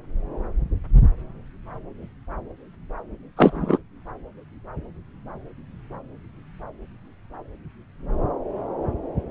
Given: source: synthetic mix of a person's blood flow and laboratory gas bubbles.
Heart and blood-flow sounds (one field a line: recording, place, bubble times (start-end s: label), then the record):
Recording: Doppler ultrasound of blood flow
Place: subclavian vein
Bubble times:
3.36-3.78 s: bubbles
From the record:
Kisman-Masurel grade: 113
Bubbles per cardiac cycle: 1 to 2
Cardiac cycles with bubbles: 1 to 10%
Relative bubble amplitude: loud (0.450 to 0.775)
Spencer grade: 1 (occasional bubble signal discernible with the cardiac motion signal, with majority of cardiac periods free of bubbles)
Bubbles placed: anywhere in the cardiac cycle